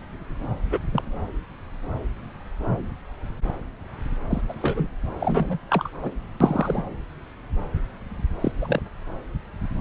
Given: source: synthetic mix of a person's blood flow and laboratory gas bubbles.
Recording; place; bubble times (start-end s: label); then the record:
Doppler ultrasound of blood flow; subclavian vein
0.70-0.79 s: bubbles
0.92-1.03 s: bubbles
4.30-4.42 s: bubbles
4.49-4.54 s: bubbles
4.62-4.88 s: bubbles
5.20-5.58 s: bubbles
5.69-5.89 s: bubbles
6.02-6.12 s: bubbles
6.40-6.85 s: bubbles
8.41-8.52 s: bubbles
8.61-8.81 s: bubbles
From the record:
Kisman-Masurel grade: 222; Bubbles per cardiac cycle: several, 3 to 8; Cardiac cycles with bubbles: 10 to 50%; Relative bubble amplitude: moderate (0.250 to 0.450); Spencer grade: 2 (many but less than half of the cardiac periods contain bubble signals, singularly or in groups); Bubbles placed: anywhere in the cardiac cycle